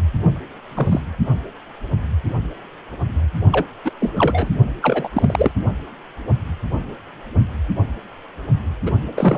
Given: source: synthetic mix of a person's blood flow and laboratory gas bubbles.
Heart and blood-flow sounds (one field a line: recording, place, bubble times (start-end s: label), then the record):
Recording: Doppler ultrasound of blood flow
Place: precordium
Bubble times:
0.69-1.00 s: bubbles
3.52-3.66 s: bubbles
3.84-3.92 s: bubbles
4.00-4.12 s: bubbles
4.17-4.49 s: bubbles
4.82-5.08 s: bubbles
5.13-5.51 s: bubbles
8.86-8.91 s: bubbles
9.14-9.37 s: bubbles
From the record:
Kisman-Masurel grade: 222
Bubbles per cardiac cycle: several, 3 to 8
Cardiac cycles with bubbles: 10 to 50%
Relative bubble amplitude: moderate (0.250 to 0.450)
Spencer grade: 2 (many but less than half of the cardiac periods contain bubble signals, singularly or in groups)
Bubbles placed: only in the low amplitude regions of the cardiac cycle